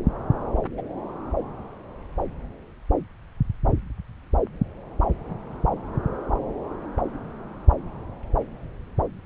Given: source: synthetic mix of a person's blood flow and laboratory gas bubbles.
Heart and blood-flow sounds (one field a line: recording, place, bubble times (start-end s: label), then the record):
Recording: Doppler ultrasound of blood flow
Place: subclavian vein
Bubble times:
0.77-0.82 s: bubbles
From the record:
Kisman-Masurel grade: 111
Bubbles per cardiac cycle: 1 to 2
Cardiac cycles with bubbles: 1 to 10%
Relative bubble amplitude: barely perceptible (0.100 to 0.250)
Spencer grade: 1 (occasional bubble signal discernible with the cardiac motion signal, with majority of cardiac periods free of bubbles)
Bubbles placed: anywhere in the cardiac cycle